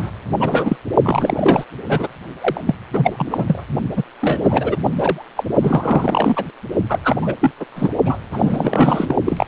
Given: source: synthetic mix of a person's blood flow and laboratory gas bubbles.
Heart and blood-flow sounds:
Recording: Doppler ultrasound of blood flow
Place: precordium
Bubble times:
0.00-0.10 s: bubbles
0.39-0.77 s: bubbles
1.02-1.64 s: bubbles
1.89-2.08 s: bubbles
2.41-2.61 s: bubbles
2.66-2.75 s: bubbles
2.93-3.63 s: bubbles
3.96-4.04 s: bubbles
4.21-4.76 s: bubbles
4.83-4.90 s: bubbles
4.97-5.26 s: bubbles
5.36-5.43 s: bubbles
5.61-6.45 s: bubbles
6.89-6.99 s: bubbles
7.04-7.17 s: bubbles
7.21-7.34 s: bubbles
7.40-7.51 s: bubbles
7.59-7.64 s: bubbles
7.75-7.93 s: bubbles
8.04-8.20 s: bubbles
8.33-9.16 s: bubbles
9.25-9.48 s: bubbles
From the record:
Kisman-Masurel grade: 333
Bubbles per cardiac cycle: rolling drumbeat, 9 or more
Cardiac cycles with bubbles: 50 to 99%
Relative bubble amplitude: loud (0.450 to 0.775)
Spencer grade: 3 (all of the cardiac periods contain showers or single bubble signals, but not dominating or overriding the cardiac motion signals)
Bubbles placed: only in the low amplitude regions of the cardiac cycle

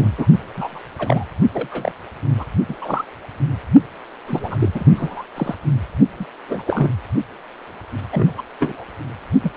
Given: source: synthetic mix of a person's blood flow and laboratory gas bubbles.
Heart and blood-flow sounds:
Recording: Doppler ultrasound of blood flow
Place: precordium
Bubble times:
0.00-0.10 s: bubbles
0.18-0.26 s: bubbles
0.54-0.80 s: bubbles
0.98-1.24 s: bubbles
1.53-1.93 s: bubbles
2.37-2.45 s: bubbles
2.68-2.75 s: bubbles
2.81-3.05 s: bubbles
4.27-4.69 s: bubbles
4.74-4.85 s: bubbles
4.95-5.24 s: bubbles
5.36-5.55 s: bubbles
6.20-6.25 s: bubbles
6.48-6.62 s: bubbles
6.66-6.90 s: bubbles
8.12-8.29 s: bubbles
8.38-8.42 s: bubbles
8.60-8.85 s: bubbles
9.43-9.51 s: bubbles
From the record:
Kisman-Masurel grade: 242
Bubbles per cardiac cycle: several, 3 to 8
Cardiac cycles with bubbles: 100%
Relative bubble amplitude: moderate (0.250 to 0.450)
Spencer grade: 3 (all of the cardiac periods contain showers or single bubble signals, but not dominating or overriding the cardiac motion signals)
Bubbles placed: only in the low amplitude regions of the cardiac cycle

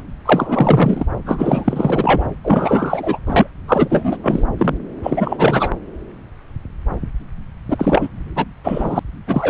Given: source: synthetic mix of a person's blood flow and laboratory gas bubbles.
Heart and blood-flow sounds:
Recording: Doppler ultrasound of blood flow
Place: subclavian vein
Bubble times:
0.00-0.03 s: bubbles
0.26-1.06 s: bubbles
1.25-2.28 s: bubbles
2.44-3.19 s: bubbles
3.27-3.48 s: bubbles
3.67-4.17 s: bubbles
4.22-4.43 s: bubbles
4.58-4.78 s: bubbles
5.03-5.71 s: bubbles
7.69-8.09 s: bubbles
8.36-8.45 s: bubbles
8.63-8.99 s: bubbles
9.27-9.50 s: bubbles
From the record:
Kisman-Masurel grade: 333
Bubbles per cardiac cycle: rolling drumbeat, 9 or more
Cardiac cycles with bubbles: 50 to 99%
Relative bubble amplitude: loud (0.450 to 0.775)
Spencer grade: 3 (all of the cardiac periods contain showers or single bubble signals, but not dominating or overriding the cardiac motion signals)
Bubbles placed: anywhere in the cardiac cycle

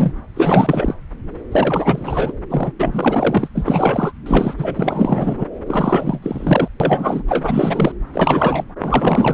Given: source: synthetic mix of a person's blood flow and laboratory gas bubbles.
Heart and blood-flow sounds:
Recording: Doppler ultrasound of blood flow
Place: subclavian vein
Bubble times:
0.00-0.12 s: bubbles
0.34-0.94 s: bubbles
1.51-2.32 s: bubbles
2.50-2.73 s: bubbles
2.79-3.48 s: bubbles
3.54-4.12 s: bubbles
4.26-4.54 s: bubbles
4.58-5.46 s: bubbles
5.67-6.68 s: bubbles
6.80-7.22 s: bubbles
7.28-7.92 s: bubbles
8.13-8.65 s: bubbles
8.82-9.34 s: bubbles
From the record:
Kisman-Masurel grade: 444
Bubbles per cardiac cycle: continuous sound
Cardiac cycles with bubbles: 100%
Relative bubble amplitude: maximal (0.775 to 0.999)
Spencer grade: 4 (maximum detectable bubble signal sounding continuously throughout systole and diastole of every cardiac period, and overriding the amplitude of the normal cardiac signals)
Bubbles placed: anywhere in the cardiac cycle

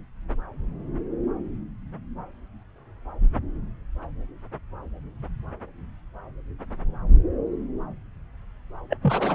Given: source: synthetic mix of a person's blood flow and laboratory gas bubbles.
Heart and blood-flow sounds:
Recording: Doppler ultrasound of blood flow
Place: subclavian vein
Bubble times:
8.89-8.97 s: bubbles
9.03-9.35 s: bubbles
From the record:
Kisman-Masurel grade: 212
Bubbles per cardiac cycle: several, 3 to 8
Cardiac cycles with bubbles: 1 to 10%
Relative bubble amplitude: moderate (0.250 to 0.450)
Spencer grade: 1 (occasional bubble signal discernible with the cardiac motion signal, with majority of cardiac periods free of bubbles)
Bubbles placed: anywhere in the cardiac cycle

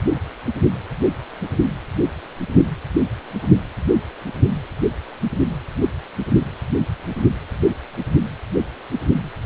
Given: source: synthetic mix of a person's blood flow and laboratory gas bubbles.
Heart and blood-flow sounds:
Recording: Doppler ultrasound of blood flow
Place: precordium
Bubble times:
no bubbles
From the record:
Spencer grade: 0 (complete lack of bubble signals)

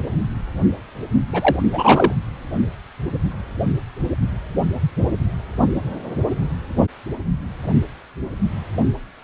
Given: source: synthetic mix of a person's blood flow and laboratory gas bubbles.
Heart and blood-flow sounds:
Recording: Doppler ultrasound of blood flow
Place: precordium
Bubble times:
1.29-1.64 s: bubbles
1.70-2.12 s: bubbles
From the record:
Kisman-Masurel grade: 213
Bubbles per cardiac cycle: several, 3 to 8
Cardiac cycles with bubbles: 1 to 10%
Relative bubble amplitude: loud (0.450 to 0.775)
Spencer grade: 1 (occasional bubble signal discernible with the cardiac motion signal, with majority of cardiac periods free of bubbles)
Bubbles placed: only in the low amplitude regions of the cardiac cycle

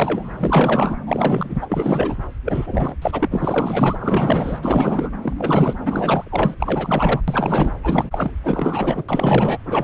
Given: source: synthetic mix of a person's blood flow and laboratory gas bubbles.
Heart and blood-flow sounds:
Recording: Doppler ultrasound of blood flow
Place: subclavian vein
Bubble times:
0.00-0.98 s: bubbles
1.05-1.65 s: bubbles
1.69-2.17 s: bubbles
2.45-2.96 s: bubbles
3.02-5.10 s: bubbles
5.21-5.33 s: bubbles
5.38-5.74 s: bubbles
5.85-6.57 s: bubbles
6.59-7.21 s: bubbles
7.27-7.72 s: bubbles
7.83-8.32 s: bubbles
8.44-9.04 s: bubbles
9.09-9.58 s: bubbles
9.66-9.83 s: bubbles
From the record:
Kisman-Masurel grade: 444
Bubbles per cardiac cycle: continuous sound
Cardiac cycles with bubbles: 100%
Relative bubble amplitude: maximal (0.775 to 0.999)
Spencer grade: 4 (maximum detectable bubble signal sounding continuously throughout systole and diastole of every cardiac period, and overriding the amplitude of the normal cardiac signals)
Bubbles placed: anywhere in the cardiac cycle

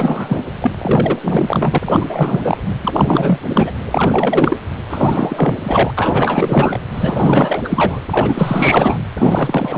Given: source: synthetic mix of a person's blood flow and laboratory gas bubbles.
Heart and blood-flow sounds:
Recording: Doppler ultrasound of blood flow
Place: precordium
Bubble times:
0.00-0.44 s: bubbles
0.60-0.72 s: bubbles
0.78-1.79 s: bubbles
1.85-2.58 s: bubbles
2.85-3.39 s: bubbles
3.54-3.71 s: bubbles
3.91-4.58 s: bubbles
4.90-5.92 s: bubbles
5.97-6.79 s: bubbles
6.94-8.00 s: bubbles
8.10-8.98 s: bubbles
9.18-9.78 s: bubbles
From the record:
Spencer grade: 4 (maximum detectable bubble signal sounding continuously throughout systole and diastole of every cardiac period, and overriding the amplitude of the normal cardiac signals)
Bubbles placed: anywhere in the cardiac cycle

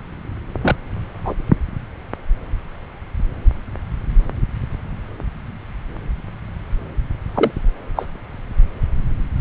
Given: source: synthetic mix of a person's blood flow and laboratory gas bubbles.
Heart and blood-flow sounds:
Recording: Doppler ultrasound of blood flow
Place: subclavian vein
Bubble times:
0.61-0.76 s: bubbles
1.25-1.35 s: bubbles
7.34-7.51 s: bubbles
7.96-8.06 s: bubbles
From the record:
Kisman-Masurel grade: 123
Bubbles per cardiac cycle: 1 to 2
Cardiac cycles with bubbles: 10 to 50%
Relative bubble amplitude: loud (0.450 to 0.775)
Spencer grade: 2 (many but less than half of the cardiac periods contain bubble signals, singularly or in groups)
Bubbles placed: anywhere in the cardiac cycle

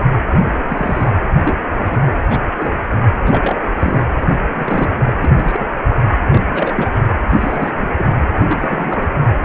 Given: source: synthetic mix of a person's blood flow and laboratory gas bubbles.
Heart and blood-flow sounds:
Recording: Doppler ultrasound of blood flow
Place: precordium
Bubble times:
0.30-0.66 s: bubbles
0.68-1.11 s: bubbles
1.35-1.55 s: bubbles
1.72-2.07 s: bubbles
2.21-2.42 s: bubbles
2.50-2.72 s: bubbles
3.25-3.64 s: bubbles
3.74-4.05 s: bubbles
4.18-4.37 s: bubbles
4.54-4.91 s: bubbles
5.06-5.13 s: bubbles
5.22-5.66 s: bubbles
5.89-6.01 s: bubbles
6.32-7.01 s: bubbles
7.29-7.95 s: bubbles
7.98-8.26 s: bubbles
8.37-9.09 s: bubbles
From the record:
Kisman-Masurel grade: 232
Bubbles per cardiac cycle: several, 3 to 8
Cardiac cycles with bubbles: 50 to 99%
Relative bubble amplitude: moderate (0.250 to 0.450)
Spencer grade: 3 (all of the cardiac periods contain showers or single bubble signals, but not dominating or overriding the cardiac motion signals)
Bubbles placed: anywhere in the cardiac cycle

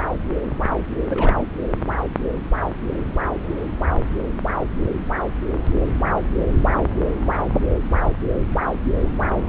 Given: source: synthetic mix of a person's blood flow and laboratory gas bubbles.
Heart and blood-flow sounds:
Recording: Doppler ultrasound of blood flow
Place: subclavian vein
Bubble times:
1.09-1.48 s: bubbles
From the record:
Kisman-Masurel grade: 212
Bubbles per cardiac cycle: several, 3 to 8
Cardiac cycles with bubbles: 1 to 10%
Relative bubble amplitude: moderate (0.250 to 0.450)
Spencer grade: 1 (occasional bubble signal discernible with the cardiac motion signal, with majority of cardiac periods free of bubbles)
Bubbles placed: anywhere in the cardiac cycle

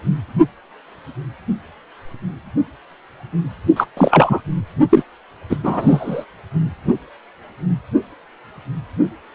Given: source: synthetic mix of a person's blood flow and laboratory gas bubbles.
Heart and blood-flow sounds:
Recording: Doppler ultrasound of blood flow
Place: precordium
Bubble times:
3.76-3.86 s: bubbles
3.97-4.41 s: bubbles
4.89-5.02 s: bubbles
5.50-5.58 s: bubbles
5.63-6.25 s: bubbles
From the record:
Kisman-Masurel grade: 223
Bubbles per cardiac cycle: several, 3 to 8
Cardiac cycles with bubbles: 10 to 50%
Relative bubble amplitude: loud (0.450 to 0.775)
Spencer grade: 2 (many but less than half of the cardiac periods contain bubble signals, singularly or in groups)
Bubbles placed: only in the low amplitude regions of the cardiac cycle

